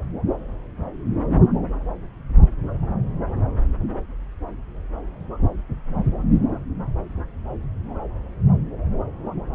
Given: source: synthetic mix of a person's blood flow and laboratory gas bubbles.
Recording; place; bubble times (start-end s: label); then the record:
Doppler ultrasound of blood flow; subclavian vein
no bubbles
From the record:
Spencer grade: 0 (complete lack of bubble signals)